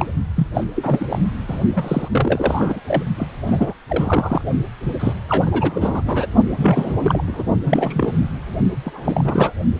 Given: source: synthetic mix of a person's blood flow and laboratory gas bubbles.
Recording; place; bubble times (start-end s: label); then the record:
Doppler ultrasound of blood flow; precordium
0.00-0.06 s: bubbles
0.36-0.47 s: bubbles
0.54-0.66 s: bubbles
0.76-1.06 s: bubbles
1.10-1.19 s: bubbles
1.48-1.59 s: bubbles
1.76-2.08 s: bubbles
2.12-2.81 s: bubbles
2.87-3.04 s: bubbles
3.18-3.27 s: bubbles
3.46-3.74 s: bubbles
3.90-4.42 s: bubbles
5.00-5.13 s: bubbles
5.28-6.02 s: bubbles
6.05-6.26 s: bubbles
6.58-6.93 s: bubbles
7.00-7.22 s: bubbles
7.26-7.44 s: bubbles
7.63-8.26 s: bubbles
8.84-9.52 s: bubbles
From the record:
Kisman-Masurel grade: 332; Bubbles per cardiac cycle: rolling drumbeat, 9 or more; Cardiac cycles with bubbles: 50 to 99%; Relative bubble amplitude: moderate (0.250 to 0.450); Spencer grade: 3 (all of the cardiac periods contain showers or single bubble signals, but not dominating or overriding the cardiac motion signals); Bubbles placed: only in the low amplitude regions of the cardiac cycle